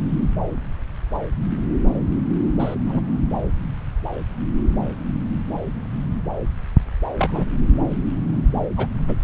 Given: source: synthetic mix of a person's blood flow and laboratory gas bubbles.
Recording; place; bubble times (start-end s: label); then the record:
Doppler ultrasound of blood flow; subclavian vein
2.58-2.75 s: bubbles
2.86-3.00 s: bubbles
7.18-7.46 s: bubbles
8.77-8.88 s: bubbles
9.07-9.15 s: bubbles
From the record:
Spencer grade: 2 (many but less than half of the cardiac periods contain bubble signals, singularly or in groups); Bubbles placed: anywhere in the cardiac cycle